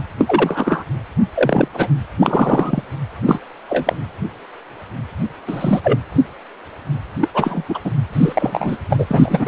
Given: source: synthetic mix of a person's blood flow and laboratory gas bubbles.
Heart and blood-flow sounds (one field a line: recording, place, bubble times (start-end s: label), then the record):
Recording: Doppler ultrasound of blood flow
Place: precordium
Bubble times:
0.18-0.84 s: bubbles
1.35-1.68 s: bubbles
1.74-1.88 s: bubbles
2.19-2.83 s: bubbles
3.25-3.39 s: bubbles
3.69-3.95 s: bubbles
5.46-5.81 s: bubbles
5.83-5.99 s: bubbles
7.21-7.29 s: bubbles
7.34-7.65 s: bubbles
7.68-7.79 s: bubbles
7.84-7.91 s: bubbles
8.12-8.77 s: bubbles
8.90-9.48 s: bubbles
From the record:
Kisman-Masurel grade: 233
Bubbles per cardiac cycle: several, 3 to 8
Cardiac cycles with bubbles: 50 to 99%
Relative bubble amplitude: loud (0.450 to 0.775)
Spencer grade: 3 (all of the cardiac periods contain showers or single bubble signals, but not dominating or overriding the cardiac motion signals)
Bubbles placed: anywhere in the cardiac cycle